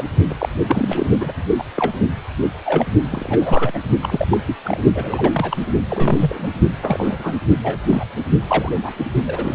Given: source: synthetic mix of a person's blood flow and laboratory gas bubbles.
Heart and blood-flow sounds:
Doppler ultrasound of blood flow; precordium
0.00-0.03 s: bubbles
0.29-0.35 s: bubbles
0.40-0.49 s: bubbles
0.68-1.06 s: bubbles
1.19-1.32 s: bubbles
1.58-1.63 s: bubbles
1.76-1.92 s: bubbles
2.65-2.85 s: bubbles
3.10-3.78 s: bubbles
4.03-4.38 s: bubbles
4.47-4.56 s: bubbles
4.63-4.80 s: bubbles
4.95-5.57 s: bubbles
5.90-6.49 s: bubbles
6.83-7.36 s: bubbles
7.62-8.04 s: bubbles
8.47-8.79 s: bubbles
8.82-8.93 s: bubbles
9.05-9.10 s: bubbles
9.27-9.55 s: bubbles
From the record:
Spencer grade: 3 (all of the cardiac periods contain showers or single bubble signals, but not dominating or overriding the cardiac motion signals); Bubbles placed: only in the low amplitude regions of the cardiac cycle

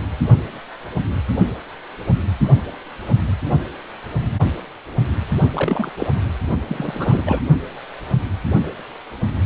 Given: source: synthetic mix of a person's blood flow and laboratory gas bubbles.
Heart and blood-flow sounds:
Doppler ultrasound of blood flow; precordium
5.54-5.90 s: bubbles
5.96-6.06 s: bubbles
6.68-7.22 s: bubbles
7.26-7.41 s: bubbles
From the record:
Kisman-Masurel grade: 222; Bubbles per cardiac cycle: several, 3 to 8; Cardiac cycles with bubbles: 10 to 50%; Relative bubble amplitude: moderate (0.250 to 0.450); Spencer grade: 2 (many but less than half of the cardiac periods contain bubble signals, singularly or in groups); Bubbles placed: only in the low amplitude regions of the cardiac cycle

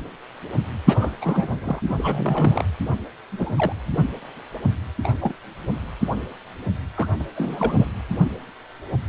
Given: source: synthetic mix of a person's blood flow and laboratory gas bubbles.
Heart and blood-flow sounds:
Doppler ultrasound of blood flow; precordium
0.86-0.97 s: bubbles
1.00-1.11 s: bubbles
1.21-1.80 s: bubbles
1.87-2.65 s: bubbles
3.31-3.73 s: bubbles
5.03-5.15 s: bubbles
5.21-5.33 s: bubbles
6.95-7.08 s: bubbles
7.20-7.24 s: bubbles
7.36-7.86 s: bubbles
From the record:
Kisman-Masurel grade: 221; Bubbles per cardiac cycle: several, 3 to 8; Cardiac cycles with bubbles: 10 to 50%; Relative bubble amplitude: barely perceptible (0.100 to 0.250); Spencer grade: 2 (many but less than half of the cardiac periods contain bubble signals, singularly or in groups); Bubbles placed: anywhere in the cardiac cycle

